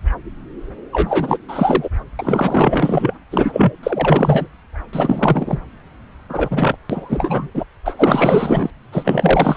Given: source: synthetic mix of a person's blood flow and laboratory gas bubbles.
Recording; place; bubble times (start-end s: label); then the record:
Doppler ultrasound of blood flow; subclavian vein
0.92-1.38 s: bubbles
1.48-1.88 s: bubbles
2.19-3.14 s: bubbles
3.30-3.72 s: bubbles
3.83-4.47 s: bubbles
4.93-5.59 s: bubbles
6.29-6.76 s: bubbles
6.89-7.49 s: bubbles
7.54-7.63 s: bubbles
7.85-8.70 s: bubbles
8.92-9.57 s: bubbles
From the record:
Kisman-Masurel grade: 444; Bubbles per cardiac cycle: continuous sound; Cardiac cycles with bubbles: 100%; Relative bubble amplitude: maximal (0.775 to 0.999); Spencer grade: 4 (maximum detectable bubble signal sounding continuously throughout systole and diastole of every cardiac period, and overriding the amplitude of the normal cardiac signals); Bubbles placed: anywhere in the cardiac cycle